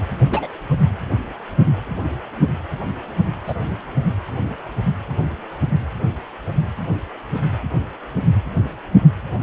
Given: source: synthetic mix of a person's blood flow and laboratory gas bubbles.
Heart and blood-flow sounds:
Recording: Doppler ultrasound of blood flow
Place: precordium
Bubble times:
0.31-0.49 s: bubbles
3.46-3.54 s: bubbles
From the record:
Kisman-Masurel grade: 122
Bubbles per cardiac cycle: 1 to 2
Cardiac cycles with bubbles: 10 to 50%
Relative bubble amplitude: moderate (0.250 to 0.450)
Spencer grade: 2 (many but less than half of the cardiac periods contain bubble signals, singularly or in groups)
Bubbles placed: anywhere in the cardiac cycle

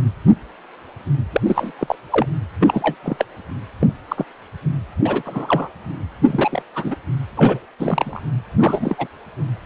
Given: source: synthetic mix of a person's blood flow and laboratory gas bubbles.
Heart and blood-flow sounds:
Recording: Doppler ultrasound of blood flow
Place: precordium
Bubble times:
1.32-1.41 s: bubbles
1.46-1.72 s: bubbles
1.78-1.95 s: bubbles
2.12-2.26 s: bubbles
2.60-2.96 s: bubbles
3.03-3.25 s: bubbles
3.80-3.94 s: bubbles
4.08-4.25 s: bubbles
5.05-5.22 s: bubbles
5.25-5.68 s: bubbles
6.27-6.62 s: bubbles
6.75-6.96 s: bubbles
7.36-7.59 s: bubbles
7.79-8.23 s: bubbles
8.59-9.08 s: bubbles
From the record:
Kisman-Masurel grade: 232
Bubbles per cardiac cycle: several, 3 to 8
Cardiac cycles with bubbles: 50 to 99%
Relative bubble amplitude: moderate (0.250 to 0.450)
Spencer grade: 3 (all of the cardiac periods contain showers or single bubble signals, but not dominating or overriding the cardiac motion signals)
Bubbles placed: anywhere in the cardiac cycle

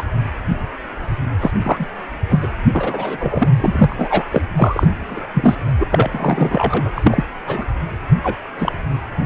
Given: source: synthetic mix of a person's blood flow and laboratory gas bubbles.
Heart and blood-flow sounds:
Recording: Doppler ultrasound of blood flow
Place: precordium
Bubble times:
0.00-0.04 s: bubbles
1.41-1.51 s: bubbles
1.59-1.87 s: bubbles
2.29-2.48 s: bubbles
2.75-3.48 s: bubbles
3.56-4.24 s: bubbles
4.31-4.42 s: bubbles
4.56-5.22 s: bubbles
5.34-5.55 s: bubbles
5.79-5.88 s: bubbles
5.91-6.91 s: bubbles
6.96-7.24 s: bubbles
7.46-7.66 s: bubbles
8.23-8.36 s: bubbles
8.59-8.72 s: bubbles
From the record:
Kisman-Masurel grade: 243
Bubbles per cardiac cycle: several, 3 to 8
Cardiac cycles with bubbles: 100%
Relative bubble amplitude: loud (0.450 to 0.775)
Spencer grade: 3 (all of the cardiac periods contain showers or single bubble signals, but not dominating or overriding the cardiac motion signals)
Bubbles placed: anywhere in the cardiac cycle

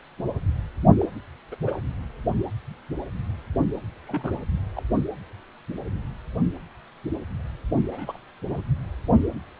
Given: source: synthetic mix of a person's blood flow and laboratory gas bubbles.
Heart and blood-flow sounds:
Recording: Doppler ultrasound of blood flow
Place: precordium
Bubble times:
1.01-1.05 s: bubbles
1.51-1.55 s: bubbles
1.65-1.80 s: bubbles
4.07-4.40 s: bubbles
4.76-4.83 s: bubbles
7.87-8.20 s: bubbles
8.50-8.61 s: bubbles
From the record:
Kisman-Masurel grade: 221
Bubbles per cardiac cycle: several, 3 to 8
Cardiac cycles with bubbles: 10 to 50%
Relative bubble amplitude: barely perceptible (0.100 to 0.250)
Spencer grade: 2 (many but less than half of the cardiac periods contain bubble signals, singularly or in groups)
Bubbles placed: only in the low amplitude regions of the cardiac cycle

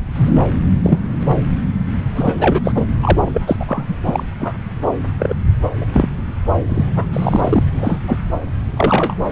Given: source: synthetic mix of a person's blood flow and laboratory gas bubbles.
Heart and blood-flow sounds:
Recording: Doppler ultrasound of blood flow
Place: subclavian vein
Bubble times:
0.15-0.30 s: bubbles
0.84-0.98 s: bubbles
2.15-2.85 s: bubbles
3.02-3.56 s: bubbles
3.59-3.94 s: bubbles
4.05-4.24 s: bubbles
4.39-4.54 s: bubbles
5.18-5.34 s: bubbles
5.80-5.85 s: bubbles
5.92-6.08 s: bubbles
6.68-6.85 s: bubbles
6.96-7.05 s: bubbles
7.13-7.63 s: bubbles
7.76-7.99 s: bubbles
8.08-8.18 s: bubbles
8.77-9.15 s: bubbles
From the record:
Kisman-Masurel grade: 243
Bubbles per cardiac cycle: several, 3 to 8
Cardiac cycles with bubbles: 100%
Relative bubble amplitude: loud (0.450 to 0.775)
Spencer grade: 3 (all of the cardiac periods contain showers or single bubble signals, but not dominating or overriding the cardiac motion signals)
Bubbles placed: anywhere in the cardiac cycle

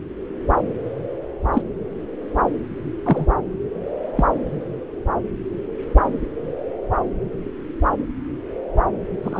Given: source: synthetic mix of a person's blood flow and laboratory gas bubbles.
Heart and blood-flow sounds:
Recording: Doppler ultrasound of blood flow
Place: subclavian vein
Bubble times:
1.53-1.62 s: bubbles
3.05-3.27 s: bubbles
4.16-4.25 s: bubbles
9.22-9.39 s: bubbles
From the record:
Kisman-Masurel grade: 123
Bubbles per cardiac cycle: 1 to 2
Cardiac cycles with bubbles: 10 to 50%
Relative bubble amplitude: loud (0.450 to 0.775)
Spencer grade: 2 (many but less than half of the cardiac periods contain bubble signals, singularly or in groups)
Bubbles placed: anywhere in the cardiac cycle

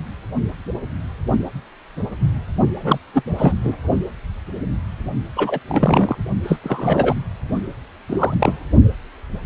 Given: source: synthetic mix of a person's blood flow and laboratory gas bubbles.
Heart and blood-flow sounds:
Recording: Doppler ultrasound of blood flow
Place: precordium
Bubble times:
2.79-2.98 s: bubbles
3.14-3.22 s: bubbles
3.38-3.54 s: bubbles
3.63-3.75 s: bubbles
5.37-5.59 s: bubbles
5.68-6.16 s: bubbles
6.43-6.59 s: bubbles
6.63-7.14 s: bubbles
8.09-8.34 s: bubbles
8.38-8.60 s: bubbles
From the record:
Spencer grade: 2 (many but less than half of the cardiac periods contain bubble signals, singularly or in groups)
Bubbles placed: only in the low amplitude regions of the cardiac cycle

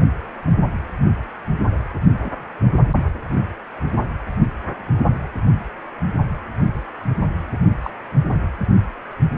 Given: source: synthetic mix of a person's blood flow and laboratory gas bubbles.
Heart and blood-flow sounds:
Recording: Doppler ultrasound of blood flow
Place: precordium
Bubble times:
2.25-2.31 s: bubbles
7.83-7.91 s: bubbles
8.31-8.39 s: bubbles
From the record:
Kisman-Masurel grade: 121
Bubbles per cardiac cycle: 1 to 2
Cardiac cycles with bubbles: 10 to 50%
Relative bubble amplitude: barely perceptible (0.100 to 0.250)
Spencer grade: 2 (many but less than half of the cardiac periods contain bubble signals, singularly or in groups)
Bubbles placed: only in the low amplitude regions of the cardiac cycle

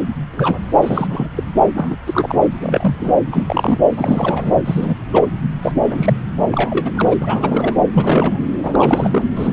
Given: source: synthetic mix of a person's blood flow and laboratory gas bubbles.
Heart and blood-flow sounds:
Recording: Doppler ultrasound of blood flow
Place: subclavian vein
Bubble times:
0.32-0.58 s: bubbles
0.81-1.06 s: bubbles
1.09-1.29 s: bubbles
1.36-1.43 s: bubbles
1.75-1.97 s: bubbles
2.06-2.38 s: bubbles
2.58-3.12 s: bubbles
3.31-3.79 s: bubbles
3.91-4.52 s: bubbles
4.65-4.96 s: bubbles
5.13-5.26 s: bubbles
5.62-5.73 s: bubbles
5.81-6.19 s: bubbles
6.51-6.91 s: bubbles
6.96-7.14 s: bubbles
7.20-7.77 s: bubbles
7.93-8.40 s: bubbles
8.62-9.25 s: bubbles
9.36-9.53 s: bubbles
From the record:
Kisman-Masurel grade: 242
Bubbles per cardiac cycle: several, 3 to 8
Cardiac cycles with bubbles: 100%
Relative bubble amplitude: moderate (0.250 to 0.450)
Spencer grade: 3 (all of the cardiac periods contain showers or single bubble signals, but not dominating or overriding the cardiac motion signals)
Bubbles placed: anywhere in the cardiac cycle

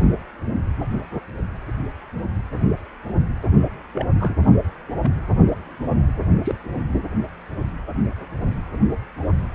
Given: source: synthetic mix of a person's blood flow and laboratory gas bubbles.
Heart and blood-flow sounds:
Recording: Doppler ultrasound of blood flow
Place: precordium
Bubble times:
3.92-4.05 s: bubbles
4.19-4.34 s: bubbles
5.02-5.10 s: bubbles
6.43-6.55 s: bubbles
From the record:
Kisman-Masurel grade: 121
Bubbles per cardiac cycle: 1 to 2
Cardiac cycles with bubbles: 10 to 50%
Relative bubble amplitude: barely perceptible (0.100 to 0.250)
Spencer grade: 2 (many but less than half of the cardiac periods contain bubble signals, singularly or in groups)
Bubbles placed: only in the low amplitude regions of the cardiac cycle

